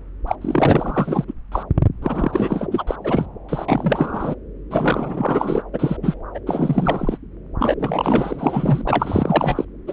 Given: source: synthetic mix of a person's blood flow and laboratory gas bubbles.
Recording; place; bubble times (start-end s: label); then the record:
Doppler ultrasound of blood flow; subclavian vein
0.27-0.35 s: bubbles
0.41-1.33 s: bubbles
1.51-1.63 s: bubbles
2.01-2.68 s: bubbles
2.71-2.85 s: bubbles
2.87-2.96 s: bubbles
3.04-3.26 s: bubbles
3.49-3.66 s: bubbles
3.68-4.35 s: bubbles
4.70-5.62 s: bubbles
5.72-5.97 s: bubbles
6.02-6.15 s: bubbles
6.34-6.39 s: bubbles
6.46-7.18 s: bubbles
7.58-7.74 s: bubbles
7.79-8.84 s: bubbles
8.87-9.64 s: bubbles
9.87-9.93 s: bubbles
From the record:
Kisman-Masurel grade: 444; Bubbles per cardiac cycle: continuous sound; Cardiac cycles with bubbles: 100%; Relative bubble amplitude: maximal (0.775 to 0.999); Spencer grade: 4 (maximum detectable bubble signal sounding continuously throughout systole and diastole of every cardiac period, and overriding the amplitude of the normal cardiac signals); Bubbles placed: anywhere in the cardiac cycle